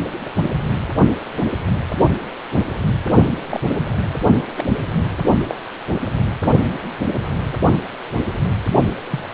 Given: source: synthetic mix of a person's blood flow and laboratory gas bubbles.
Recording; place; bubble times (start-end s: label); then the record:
Doppler ultrasound of blood flow; precordium
0.25-0.30 s: bubbles
3.50-3.60 s: bubbles
4.57-4.64 s: bubbles
5.48-5.54 s: bubbles
9.11-9.29 s: bubbles
From the record:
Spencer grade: 2 (many but less than half of the cardiac periods contain bubble signals, singularly or in groups); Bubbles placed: only in the low amplitude regions of the cardiac cycle